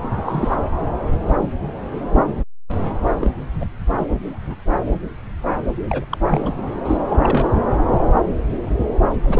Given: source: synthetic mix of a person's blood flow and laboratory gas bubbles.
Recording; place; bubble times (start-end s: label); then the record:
Doppler ultrasound of blood flow; subclavian vein
0.24-0.56 s: bubbles
3.06-3.14 s: bubbles
3.17-3.30 s: bubbles
3.53-3.68 s: bubbles
3.97-4.08 s: bubbles
4.27-4.56 s: bubbles
5.88-6.04 s: bubbles
6.09-6.17 s: bubbles
6.28-6.54 s: bubbles
6.85-6.97 s: bubbles
7.08-7.17 s: bubbles
7.23-7.49 s: bubbles
9.23-9.40 s: bubbles
From the record:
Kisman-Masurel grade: 232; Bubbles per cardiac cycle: several, 3 to 8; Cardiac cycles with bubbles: 50 to 99%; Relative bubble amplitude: moderate (0.250 to 0.450); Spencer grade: 3 (all of the cardiac periods contain showers or single bubble signals, but not dominating or overriding the cardiac motion signals); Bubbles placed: anywhere in the cardiac cycle